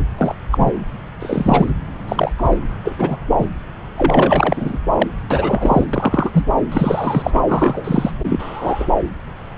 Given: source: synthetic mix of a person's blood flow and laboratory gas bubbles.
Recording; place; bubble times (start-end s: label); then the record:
Doppler ultrasound of blood flow; subclavian vein
0.18-0.34 s: bubbles
0.51-0.71 s: bubbles
1.20-1.71 s: bubbles
2.08-2.33 s: bubbles
2.37-2.58 s: bubbles
2.84-3.17 s: bubbles
3.38-3.47 s: bubbles
3.97-4.78 s: bubbles
4.93-5.08 s: bubbles
5.30-5.86 s: bubbles
5.93-6.46 s: bubbles
6.71-7.40 s: bubbles
7.48-8.11 s: bubbles
8.29-8.87 s: bubbles
From the record:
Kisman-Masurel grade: 233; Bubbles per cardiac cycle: several, 3 to 8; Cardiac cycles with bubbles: 50 to 99%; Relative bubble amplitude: loud (0.450 to 0.775); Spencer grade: 3 (all of the cardiac periods contain showers or single bubble signals, but not dominating or overriding the cardiac motion signals); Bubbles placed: anywhere in the cardiac cycle